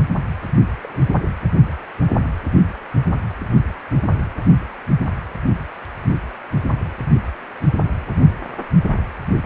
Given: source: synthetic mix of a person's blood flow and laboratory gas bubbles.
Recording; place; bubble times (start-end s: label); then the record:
Doppler ultrasound of blood flow; precordium
0.81-0.89 s: bubbles
0.93-0.97 s: bubbles
1.02-1.28 s: bubbles
From the record:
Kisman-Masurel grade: 211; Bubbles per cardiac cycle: several, 3 to 8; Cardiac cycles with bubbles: 1 to 10%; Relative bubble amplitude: barely perceptible (0.100 to 0.250); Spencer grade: 1 (occasional bubble signal discernible with the cardiac motion signal, with majority of cardiac periods free of bubbles); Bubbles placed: only in the low amplitude regions of the cardiac cycle